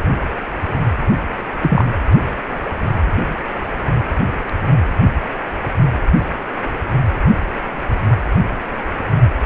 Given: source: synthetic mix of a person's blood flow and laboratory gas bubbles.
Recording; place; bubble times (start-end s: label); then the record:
Doppler ultrasound of blood flow; precordium
1.61-1.84 s: bubbles
From the record:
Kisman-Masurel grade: 213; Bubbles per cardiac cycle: several, 3 to 8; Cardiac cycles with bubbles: 1 to 10%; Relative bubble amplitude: loud (0.450 to 0.775); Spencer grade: 1 (occasional bubble signal discernible with the cardiac motion signal, with majority of cardiac periods free of bubbles); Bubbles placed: anywhere in the cardiac cycle